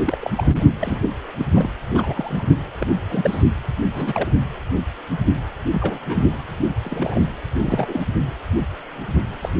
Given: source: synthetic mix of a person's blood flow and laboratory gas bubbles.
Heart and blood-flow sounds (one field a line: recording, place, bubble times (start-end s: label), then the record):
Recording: Doppler ultrasound of blood flow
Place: precordium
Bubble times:
0.04-0.18 s: bubbles
0.21-0.31 s: bubbles
0.37-0.64 s: bubbles
0.80-1.09 s: bubbles
1.39-1.46 s: bubbles
1.54-1.71 s: bubbles
1.90-2.44 s: bubbles
2.80-2.87 s: bubbles
3.09-3.44 s: bubbles
3.93-4.32 s: bubbles
5.72-6.26 s: bubbles
6.84-7.26 s: bubbles
7.58-8.05 s: bubbles
9.42-9.49 s: bubbles
From the record:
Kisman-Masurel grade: 232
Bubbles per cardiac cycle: several, 3 to 8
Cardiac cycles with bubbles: 50 to 99%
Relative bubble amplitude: moderate (0.250 to 0.450)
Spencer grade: 3 (all of the cardiac periods contain showers or single bubble signals, but not dominating or overriding the cardiac motion signals)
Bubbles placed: anywhere in the cardiac cycle